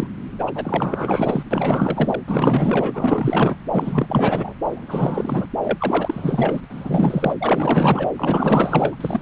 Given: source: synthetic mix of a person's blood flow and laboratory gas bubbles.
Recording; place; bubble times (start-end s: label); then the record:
Doppler ultrasound of blood flow; subclavian vein
0.00-0.08 s: bubbles
0.39-0.52 s: bubbles
0.55-1.43 s: bubbles
1.50-2.21 s: bubbles
2.28-3.56 s: bubbles
3.73-4.54 s: bubbles
4.68-5.46 s: bubbles
5.63-6.60 s: bubbles
6.64-6.66 s: bubbles
6.69-7.35 s: bubbles
7.40-8.10 s: bubbles
8.17-8.96 s: bubbles
9.00-9.22 s: bubbles
From the record:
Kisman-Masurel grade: 444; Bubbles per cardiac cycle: continuous sound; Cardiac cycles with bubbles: 100%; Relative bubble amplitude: maximal (0.775 to 0.999); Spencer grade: 4 (maximum detectable bubble signal sounding continuously throughout systole and diastole of every cardiac period, and overriding the amplitude of the normal cardiac signals); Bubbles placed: anywhere in the cardiac cycle